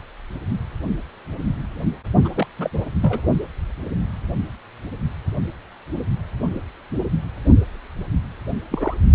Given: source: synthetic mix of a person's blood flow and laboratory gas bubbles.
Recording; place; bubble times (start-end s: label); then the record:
Doppler ultrasound of blood flow; precordium
2.24-2.29 s: bubbles
2.34-2.46 s: bubbles
2.58-2.70 s: bubbles
3.02-3.21 s: bubbles
8.71-8.95 s: bubbles
From the record:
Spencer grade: 2 (many but less than half of the cardiac periods contain bubble signals, singularly or in groups); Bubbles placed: only in the low amplitude regions of the cardiac cycle